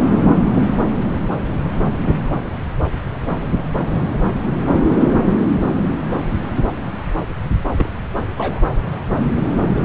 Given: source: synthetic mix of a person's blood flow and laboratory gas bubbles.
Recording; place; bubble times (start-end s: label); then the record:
Doppler ultrasound of blood flow; subclavian vein
7.69-7.90 s: bubbles
8.37-8.61 s: bubbles
From the record:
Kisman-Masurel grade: 121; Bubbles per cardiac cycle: 1 to 2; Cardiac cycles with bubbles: 10 to 50%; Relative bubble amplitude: barely perceptible (0.100 to 0.250); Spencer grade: 2 (many but less than half of the cardiac periods contain bubble signals, singularly or in groups); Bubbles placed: anywhere in the cardiac cycle